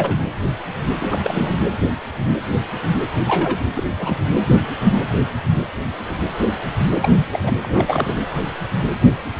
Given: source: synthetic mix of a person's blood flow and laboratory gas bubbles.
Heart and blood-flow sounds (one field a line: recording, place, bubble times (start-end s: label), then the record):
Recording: Doppler ultrasound of blood flow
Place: precordium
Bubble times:
0.00-0.19 s: bubbles
1.00-1.56 s: bubbles
3.27-3.59 s: bubbles
3.76-3.84 s: bubbles
3.99-4.21 s: bubbles
7.01-7.13 s: bubbles
7.19-7.25 s: bubbles
7.31-7.39 s: bubbles
7.43-7.52 s: bubbles
7.62-8.16 s: bubbles
From the record:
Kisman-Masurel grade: 222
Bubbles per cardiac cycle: several, 3 to 8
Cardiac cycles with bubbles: 10 to 50%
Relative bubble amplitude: moderate (0.250 to 0.450)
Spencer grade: 2 (many but less than half of the cardiac periods contain bubble signals, singularly or in groups)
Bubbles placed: anywhere in the cardiac cycle